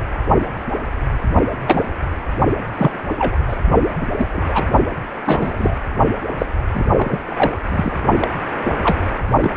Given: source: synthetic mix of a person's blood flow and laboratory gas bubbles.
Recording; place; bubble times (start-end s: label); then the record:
Doppler ultrasound of blood flow; precordium
1.66-1.87 s: bubbles
2.77-2.99 s: bubbles
3.18-3.39 s: bubbles
3.48-3.57 s: bubbles
4.00-4.06 s: bubbles
4.17-4.27 s: bubbles
4.33-4.44 s: bubbles
4.49-4.66 s: bubbles
5.25-5.76 s: bubbles
6.37-6.46 s: bubbles
6.74-6.85 s: bubbles
6.96-7.20 s: bubbles
7.27-7.58 s: bubbles
7.69-7.96 s: bubbles
8.19-8.27 s: bubbles
8.65-8.71 s: bubbles
8.83-8.98 s: bubbles
9.40-9.55 s: bubbles
From the record:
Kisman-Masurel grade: 233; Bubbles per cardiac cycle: several, 3 to 8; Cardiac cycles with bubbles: 50 to 99%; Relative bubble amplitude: loud (0.450 to 0.775); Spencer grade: 3 (all of the cardiac periods contain showers or single bubble signals, but not dominating or overriding the cardiac motion signals); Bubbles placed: only in the low amplitude regions of the cardiac cycle